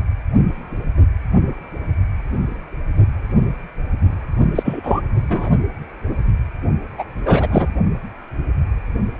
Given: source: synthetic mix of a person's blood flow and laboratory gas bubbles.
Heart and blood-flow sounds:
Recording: Doppler ultrasound of blood flow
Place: precordium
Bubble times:
4.55-5.01 s: bubbles
5.29-5.49 s: bubbles
6.98-7.04 s: bubbles
7.25-7.74 s: bubbles
From the record:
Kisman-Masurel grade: 223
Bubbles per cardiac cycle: several, 3 to 8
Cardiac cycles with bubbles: 10 to 50%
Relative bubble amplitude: loud (0.450 to 0.775)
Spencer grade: 2 (many but less than half of the cardiac periods contain bubble signals, singularly or in groups)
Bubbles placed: only in the low amplitude regions of the cardiac cycle

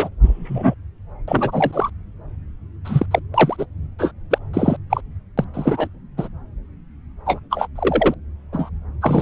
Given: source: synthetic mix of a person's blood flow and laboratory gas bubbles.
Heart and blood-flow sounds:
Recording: Doppler ultrasound of blood flow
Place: subclavian vein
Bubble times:
0.00-0.09 s: bubbles
0.25-0.74 s: bubbles
1.27-1.90 s: bubbles
2.85-3.06 s: bubbles
3.11-3.20 s: bubbles
3.34-3.66 s: bubbles
3.99-4.12 s: bubbles
4.30-4.38 s: bubbles
4.53-4.77 s: bubbles
4.90-5.01 s: bubbles
5.38-5.45 s: bubbles
5.54-5.88 s: bubbles
6.17-6.29 s: bubbles
7.25-7.40 s: bubbles
7.50-7.68 s: bubbles
7.76-8.14 s: bubbles
8.52-8.70 s: bubbles
9.01-9.22 s: bubbles
From the record:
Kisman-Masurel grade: 243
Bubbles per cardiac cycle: several, 3 to 8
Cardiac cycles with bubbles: 100%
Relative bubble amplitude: loud (0.450 to 0.775)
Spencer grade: 3 (all of the cardiac periods contain showers or single bubble signals, but not dominating or overriding the cardiac motion signals)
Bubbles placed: anywhere in the cardiac cycle

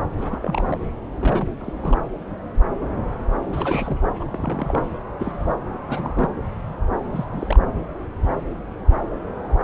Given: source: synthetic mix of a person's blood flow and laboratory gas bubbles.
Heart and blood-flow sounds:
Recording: Doppler ultrasound of blood flow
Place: subclavian vein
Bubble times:
0.17-0.78 s: bubbles
1.20-1.49 s: bubbles
1.58-1.73 s: bubbles
1.81-1.98 s: bubbles
3.52-3.97 s: bubbles
4.19-4.24 s: bubbles
4.30-4.83 s: bubbles
5.19-5.54 s: bubbles
5.73-5.78 s: bubbles
5.88-6.29 s: bubbles
7.12-7.25 s: bubbles
7.33-7.59 s: bubbles
From the record:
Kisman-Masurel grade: 221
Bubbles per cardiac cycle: several, 3 to 8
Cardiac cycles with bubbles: 10 to 50%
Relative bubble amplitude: barely perceptible (0.100 to 0.250)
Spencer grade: 2 (many but less than half of the cardiac periods contain bubble signals, singularly or in groups)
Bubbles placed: anywhere in the cardiac cycle

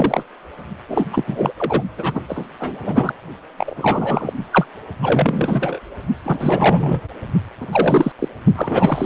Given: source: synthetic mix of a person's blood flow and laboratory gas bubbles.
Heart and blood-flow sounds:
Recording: Doppler ultrasound of blood flow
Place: precordium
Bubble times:
0.00-0.23 s: bubbles
0.88-1.04 s: bubbles
1.12-1.52 s: bubbles
1.57-1.83 s: bubbles
1.97-2.25 s: bubbles
2.29-2.47 s: bubbles
2.59-3.14 s: bubbles
3.58-4.33 s: bubbles
4.37-4.45 s: bubbles
4.51-4.64 s: bubbles
5.02-5.79 s: bubbles
6.24-7.00 s: bubbles
7.60-7.67 s: bubbles
7.71-8.12 s: bubbles
8.19-8.29 s: bubbles
8.55-9.06 s: bubbles
From the record:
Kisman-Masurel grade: 343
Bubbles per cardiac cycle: rolling drumbeat, 9 or more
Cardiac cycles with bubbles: 100%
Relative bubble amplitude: loud (0.450 to 0.775)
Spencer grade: 3 (all of the cardiac periods contain showers or single bubble signals, but not dominating or overriding the cardiac motion signals)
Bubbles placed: only in the low amplitude regions of the cardiac cycle

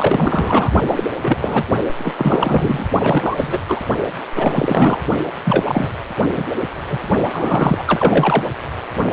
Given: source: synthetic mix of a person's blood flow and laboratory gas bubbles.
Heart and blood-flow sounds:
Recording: Doppler ultrasound of blood flow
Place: precordium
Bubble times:
0.00-0.71 s: bubbles
0.87-1.06 s: bubbles
1.21-1.37 s: bubbles
1.41-1.65 s: bubbles
1.98-2.13 s: bubbles
2.17-2.86 s: bubbles
3.02-3.58 s: bubbles
3.68-3.80 s: bubbles
4.35-5.00 s: bubbles
5.44-5.89 s: bubbles
6.37-6.44 s: bubbles
6.89-7.00 s: bubbles
7.33-7.83 s: bubbles
7.86-8.47 s: bubbles
From the record:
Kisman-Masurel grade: 343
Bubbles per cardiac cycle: rolling drumbeat, 9 or more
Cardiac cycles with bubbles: 100%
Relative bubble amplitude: loud (0.450 to 0.775)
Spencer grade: 3 (all of the cardiac periods contain showers or single bubble signals, but not dominating or overriding the cardiac motion signals)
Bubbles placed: only in the low amplitude regions of the cardiac cycle

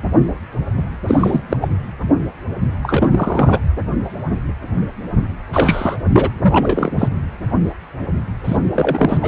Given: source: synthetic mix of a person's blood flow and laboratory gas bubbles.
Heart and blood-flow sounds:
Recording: Doppler ultrasound of blood flow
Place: precordium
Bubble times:
1.06-1.45 s: bubbles
1.49-1.57 s: bubbles
1.61-1.68 s: bubbles
2.83-3.59 s: bubbles
5.53-5.96 s: bubbles
6.12-6.29 s: bubbles
6.42-6.92 s: bubbles
6.98-7.08 s: bubbles
8.45-8.57 s: bubbles
8.72-9.18 s: bubbles
9.21-9.28 s: bubbles
From the record:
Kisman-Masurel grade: 233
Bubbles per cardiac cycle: several, 3 to 8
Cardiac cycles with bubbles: 50 to 99%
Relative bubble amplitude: loud (0.450 to 0.775)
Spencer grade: 3 (all of the cardiac periods contain showers or single bubble signals, but not dominating or overriding the cardiac motion signals)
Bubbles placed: anywhere in the cardiac cycle

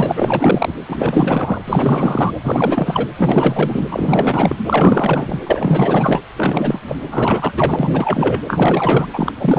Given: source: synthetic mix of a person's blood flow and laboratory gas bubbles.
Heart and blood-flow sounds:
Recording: Doppler ultrasound of blood flow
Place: precordium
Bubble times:
0.00-0.12 s: bubbles
0.15-0.74 s: bubbles
0.88-1.61 s: bubbles
1.65-2.35 s: bubbles
2.44-3.07 s: bubbles
3.16-3.87 s: bubbles
3.91-4.55 s: bubbles
4.67-5.40 s: bubbles
5.46-6.21 s: bubbles
6.37-6.79 s: bubbles
6.86-6.97 s: bubbles
7.10-8.39 s: bubbles
8.47-9.08 s: bubbles
9.13-9.32 s: bubbles
9.38-9.59 s: bubbles
From the record:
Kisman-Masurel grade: 444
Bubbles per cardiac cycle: continuous sound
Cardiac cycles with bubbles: 100%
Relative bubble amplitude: maximal (0.775 to 0.999)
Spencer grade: 4 (maximum detectable bubble signal sounding continuously throughout systole and diastole of every cardiac period, and overriding the amplitude of the normal cardiac signals)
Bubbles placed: anywhere in the cardiac cycle

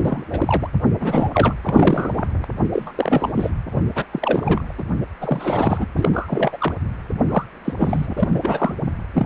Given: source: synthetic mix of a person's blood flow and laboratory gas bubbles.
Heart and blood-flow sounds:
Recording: Doppler ultrasound of blood flow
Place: precordium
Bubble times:
0.03-0.22 s: bubbles
0.30-0.67 s: bubbles
0.99-1.29 s: bubbles
1.32-1.55 s: bubbles
1.62-2.27 s: bubbles
2.64-2.69 s: bubbles
2.73-2.92 s: bubbles
2.96-3.33 s: bubbles
3.35-3.51 s: bubbles
3.70-3.83 s: bubbles
3.95-4.04 s: bubbles
4.12-4.72 s: bubbles
4.78-4.83 s: bubbles
5.21-5.86 s: bubbles
5.96-6.57 s: bubbles
6.59-6.73 s: bubbles
7.29-7.44 s: bubbles
7.65-7.73 s: bubbles
7.79-8.13 s: bubbles
8.17-8.29 s: bubbles
8.34-8.39 s: bubbles
8.43-8.75 s: bubbles
9.14-9.26 s: bubbles
From the record:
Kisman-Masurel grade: 332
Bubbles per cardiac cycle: rolling drumbeat, 9 or more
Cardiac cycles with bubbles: 50 to 99%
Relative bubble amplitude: moderate (0.250 to 0.450)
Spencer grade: 3 (all of the cardiac periods contain showers or single bubble signals, but not dominating or overriding the cardiac motion signals)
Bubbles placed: anywhere in the cardiac cycle

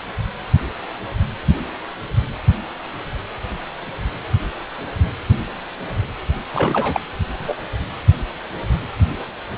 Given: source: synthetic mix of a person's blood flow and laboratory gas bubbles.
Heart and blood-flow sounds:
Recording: Doppler ultrasound of blood flow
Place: precordium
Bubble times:
6.53-7.00 s: bubbles
7.39-7.55 s: bubbles
From the record:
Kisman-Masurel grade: 223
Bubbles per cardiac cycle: several, 3 to 8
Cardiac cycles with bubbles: 10 to 50%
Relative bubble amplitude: loud (0.450 to 0.775)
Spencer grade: 2 (many but less than half of the cardiac periods contain bubble signals, singularly or in groups)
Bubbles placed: anywhere in the cardiac cycle

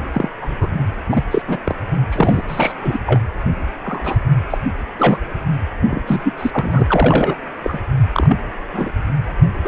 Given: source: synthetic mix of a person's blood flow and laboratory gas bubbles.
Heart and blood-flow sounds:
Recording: Doppler ultrasound of blood flow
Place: precordium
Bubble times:
0.12-0.29 s: bubbles
0.42-0.69 s: bubbles
1.09-1.24 s: bubbles
1.30-1.42 s: bubbles
1.48-1.58 s: bubbles
1.64-1.76 s: bubbles
2.10-2.43 s: bubbles
2.48-2.73 s: bubbles
2.82-2.99 s: bubbles
3.06-3.21 s: bubbles
3.44-3.51 s: bubbles
3.84-4.17 s: bubbles
4.50-4.58 s: bubbles
4.97-5.18 s: bubbles
5.88-6.02 s: bubbles
6.06-6.34 s: bubbles
6.38-7.36 s: bubbles
7.63-7.79 s: bubbles
8.13-8.37 s: bubbles
8.73-8.91 s: bubbles
9.43-9.47 s: bubbles
9.64-9.68 s: bubbles
From the record:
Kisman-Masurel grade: 243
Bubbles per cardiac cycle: several, 3 to 8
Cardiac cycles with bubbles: 100%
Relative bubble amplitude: loud (0.450 to 0.775)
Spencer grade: 3 (all of the cardiac periods contain showers or single bubble signals, but not dominating or overriding the cardiac motion signals)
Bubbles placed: anywhere in the cardiac cycle

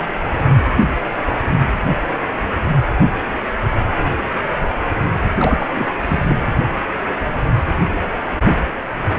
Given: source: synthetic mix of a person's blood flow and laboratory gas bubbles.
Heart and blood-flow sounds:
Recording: Doppler ultrasound of blood flow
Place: precordium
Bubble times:
5.38-5.69 s: bubbles
5.74-5.89 s: bubbles
6.01-6.36 s: bubbles
From the record:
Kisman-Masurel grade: 212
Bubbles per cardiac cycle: several, 3 to 8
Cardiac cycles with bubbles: 1 to 10%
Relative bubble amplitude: moderate (0.250 to 0.450)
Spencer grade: 1 (occasional bubble signal discernible with the cardiac motion signal, with majority of cardiac periods free of bubbles)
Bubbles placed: anywhere in the cardiac cycle

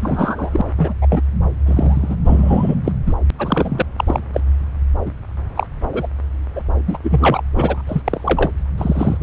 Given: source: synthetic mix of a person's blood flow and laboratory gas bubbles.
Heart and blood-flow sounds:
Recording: Doppler ultrasound of blood flow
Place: subclavian vein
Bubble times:
0.00-0.50 s: bubbles
0.53-0.61 s: bubbles
0.78-0.94 s: bubbles
1.02-1.21 s: bubbles
1.66-2.16 s: bubbles
2.25-2.75 s: bubbles
2.84-2.92 s: bubbles
3.06-3.15 s: bubbles
3.39-3.82 s: bubbles
3.97-4.04 s: bubbles
4.07-4.20 s: bubbles
4.33-4.41 s: bubbles
5.04-5.11 s: bubbles
5.55-5.67 s: bubbles
5.92-6.07 s: bubbles
6.55-6.61 s: bubbles
6.86-6.97 s: bubbles
7.03-7.42 s: bubbles
7.55-7.83 s: bubbles
7.87-8.01 s: bubbles
8.04-8.50 s: bubbles
8.77-9.17 s: bubbles
From the record:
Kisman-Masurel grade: 243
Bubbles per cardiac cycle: several, 3 to 8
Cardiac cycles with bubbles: 100%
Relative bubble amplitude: loud (0.450 to 0.775)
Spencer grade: 3 (all of the cardiac periods contain showers or single bubble signals, but not dominating or overriding the cardiac motion signals)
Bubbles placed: anywhere in the cardiac cycle

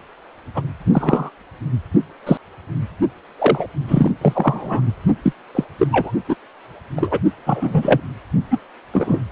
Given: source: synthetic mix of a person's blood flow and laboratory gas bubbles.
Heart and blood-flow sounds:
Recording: Doppler ultrasound of blood flow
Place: precordium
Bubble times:
0.55-0.66 s: bubbles
0.93-1.29 s: bubbles
2.25-2.38 s: bubbles
3.38-3.67 s: bubbles
3.88-4.12 s: bubbles
4.21-4.81 s: bubbles
5.24-5.33 s: bubbles
5.55-5.64 s: bubbles
5.79-5.87 s: bubbles
5.91-6.12 s: bubbles
6.29-6.35 s: bubbles
6.96-7.20 s: bubbles
7.46-8.01 s: bubbles
8.51-8.59 s: bubbles
8.93-9.21 s: bubbles
From the record:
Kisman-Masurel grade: 243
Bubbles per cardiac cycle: several, 3 to 8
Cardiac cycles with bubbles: 100%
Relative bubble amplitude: loud (0.450 to 0.775)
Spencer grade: 3 (all of the cardiac periods contain showers or single bubble signals, but not dominating or overriding the cardiac motion signals)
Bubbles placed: only in the low amplitude regions of the cardiac cycle

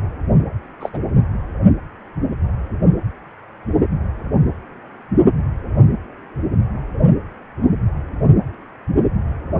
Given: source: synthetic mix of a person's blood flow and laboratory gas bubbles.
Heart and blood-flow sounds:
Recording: Doppler ultrasound of blood flow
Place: precordium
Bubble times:
0.80-0.89 s: bubbles
0.93-0.97 s: bubbles
From the record:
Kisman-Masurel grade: 112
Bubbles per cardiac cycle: 1 to 2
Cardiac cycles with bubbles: 1 to 10%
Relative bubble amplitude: moderate (0.250 to 0.450)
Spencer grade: 1 (occasional bubble signal discernible with the cardiac motion signal, with majority of cardiac periods free of bubbles)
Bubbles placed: anywhere in the cardiac cycle

